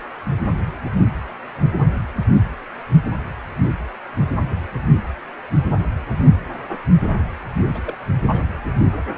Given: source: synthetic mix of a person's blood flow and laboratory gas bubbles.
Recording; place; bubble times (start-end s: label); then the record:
Doppler ultrasound of blood flow; precordium
7.72-7.82 s: bubbles
7.86-7.97 s: bubbles
8.20-8.47 s: bubbles
From the record:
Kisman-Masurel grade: 211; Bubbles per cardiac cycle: several, 3 to 8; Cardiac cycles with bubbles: 1 to 10%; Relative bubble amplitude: barely perceptible (0.100 to 0.250); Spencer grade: 1 (occasional bubble signal discernible with the cardiac motion signal, with majority of cardiac periods free of bubbles); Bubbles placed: anywhere in the cardiac cycle